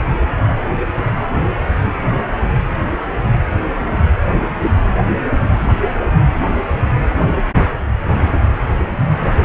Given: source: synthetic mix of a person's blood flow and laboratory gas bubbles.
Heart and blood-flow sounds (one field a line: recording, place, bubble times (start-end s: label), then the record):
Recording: Doppler ultrasound of blood flow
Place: precordium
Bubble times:
no bubbles
From the record:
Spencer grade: 0 (complete lack of bubble signals)